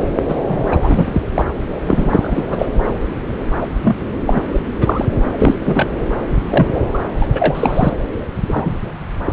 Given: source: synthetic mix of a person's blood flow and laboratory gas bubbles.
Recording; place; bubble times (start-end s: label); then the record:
Doppler ultrasound of blood flow; subclavian vein
0.28-0.36 s: bubbles
0.49-0.76 s: bubbles
0.83-1.21 s: bubbles
1.32-1.45 s: bubbles
1.85-2.44 s: bubbles
2.50-2.66 s: bubbles
3.60-3.69 s: bubbles
3.82-3.96 s: bubbles
4.27-4.42 s: bubbles
4.52-4.60 s: bubbles
4.81-5.06 s: bubbles
5.38-5.55 s: bubbles
5.65-5.88 s: bubbles
6.50-6.81 s: bubbles
6.94-6.99 s: bubbles
7.21-7.27 s: bubbles
7.35-7.93 s: bubbles
8.48-8.74 s: bubbles
9.25-9.33 s: bubbles
From the record:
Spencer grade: 3 (all of the cardiac periods contain showers or single bubble signals, but not dominating or overriding the cardiac motion signals); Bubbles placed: anywhere in the cardiac cycle